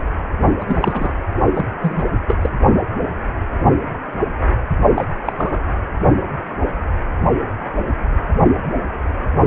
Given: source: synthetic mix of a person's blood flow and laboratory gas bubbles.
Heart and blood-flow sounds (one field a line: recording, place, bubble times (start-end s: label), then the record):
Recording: Doppler ultrasound of blood flow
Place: precordium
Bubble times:
0.60-0.65 s: bubbles
0.68-1.13 s: bubbles
1.53-1.67 s: bubbles
1.82-2.04 s: bubbles
2.27-2.38 s: bubbles
2.42-2.49 s: bubbles
4.95-5.04 s: bubbles
5.25-5.33 s: bubbles
5.38-5.60 s: bubbles
From the record:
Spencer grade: 2 (many but less than half of the cardiac periods contain bubble signals, singularly or in groups)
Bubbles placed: only in the low amplitude regions of the cardiac cycle